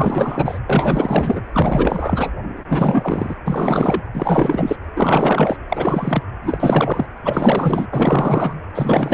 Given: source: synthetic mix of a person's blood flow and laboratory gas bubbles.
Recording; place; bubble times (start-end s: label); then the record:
Doppler ultrasound of blood flow; precordium
0.00-0.59 s: bubbles
0.66-1.42 s: bubbles
1.52-2.31 s: bubbles
2.56-3.35 s: bubbles
3.46-4.02 s: bubbles
4.13-4.76 s: bubbles
4.96-5.56 s: bubbles
5.69-6.22 s: bubbles
6.42-7.06 s: bubbles
7.22-7.88 s: bubbles
7.91-8.62 s: bubbles
8.75-9.14 s: bubbles
From the record:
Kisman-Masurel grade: 444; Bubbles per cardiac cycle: continuous sound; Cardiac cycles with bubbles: 100%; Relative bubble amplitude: maximal (0.775 to 0.999); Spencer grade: 4 (maximum detectable bubble signal sounding continuously throughout systole and diastole of every cardiac period, and overriding the amplitude of the normal cardiac signals); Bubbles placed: anywhere in the cardiac cycle